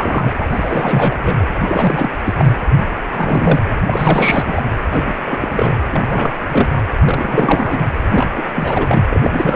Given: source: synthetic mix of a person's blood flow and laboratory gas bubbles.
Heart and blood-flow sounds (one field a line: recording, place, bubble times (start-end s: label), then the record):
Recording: Doppler ultrasound of blood flow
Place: precordium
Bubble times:
0.00-0.33 s: bubbles
0.40-0.45 s: bubbles
0.50-1.18 s: bubbles
1.24-1.46 s: bubbles
1.63-2.09 s: bubbles
2.24-2.52 s: bubbles
2.77-2.84 s: bubbles
3.11-3.62 s: bubbles
3.87-4.62 s: bubbles
4.90-5.14 s: bubbles
5.25-5.77 s: bubbles
5.92-6.33 s: bubbles
6.51-6.83 s: bubbles
7.04-7.79 s: bubbles
8.03-8.27 s: bubbles
8.32-8.46 s: bubbles
8.54-9.03 s: bubbles
9.10-9.21 s: bubbles
9.23-9.56 s: bubbles
From the record:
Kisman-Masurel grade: 342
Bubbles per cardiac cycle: rolling drumbeat, 9 or more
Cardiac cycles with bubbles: 100%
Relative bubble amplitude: moderate (0.250 to 0.450)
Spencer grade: 3 (all of the cardiac periods contain showers or single bubble signals, but not dominating or overriding the cardiac motion signals)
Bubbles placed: anywhere in the cardiac cycle